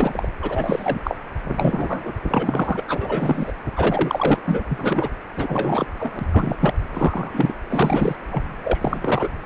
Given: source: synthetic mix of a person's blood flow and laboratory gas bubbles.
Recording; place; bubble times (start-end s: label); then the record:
Doppler ultrasound of blood flow; precordium
0.00-0.27 s: bubbles
0.42-1.00 s: bubbles
1.03-1.17 s: bubbles
1.57-2.12 s: bubbles
2.28-2.85 s: bubbles
2.88-3.53 s: bubbles
3.76-4.38 s: bubbles
4.44-4.63 s: bubbles
4.68-5.09 s: bubbles
5.36-5.86 s: bubbles
5.99-6.26 s: bubbles
6.32-6.56 s: bubbles
6.59-6.74 s: bubbles
6.91-7.53 s: bubbles
7.69-8.16 s: bubbles
8.31-8.43 s: bubbles
8.64-9.29 s: bubbles
From the record:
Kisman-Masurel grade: 343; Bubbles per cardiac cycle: rolling drumbeat, 9 or more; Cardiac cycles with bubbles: 100%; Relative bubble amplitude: loud (0.450 to 0.775); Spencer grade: 3 (all of the cardiac periods contain showers or single bubble signals, but not dominating or overriding the cardiac motion signals); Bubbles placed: anywhere in the cardiac cycle